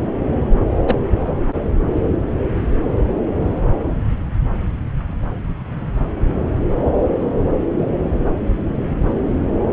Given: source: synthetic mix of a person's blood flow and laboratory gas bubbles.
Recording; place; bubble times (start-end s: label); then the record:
Doppler ultrasound of blood flow; subclavian vein
0.86-0.96 s: bubbles
From the record:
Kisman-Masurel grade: 113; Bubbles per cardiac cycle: 1 to 2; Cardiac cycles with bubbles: 1 to 10%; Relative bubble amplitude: loud (0.450 to 0.775); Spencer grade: 1 (occasional bubble signal discernible with the cardiac motion signal, with majority of cardiac periods free of bubbles); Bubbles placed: anywhere in the cardiac cycle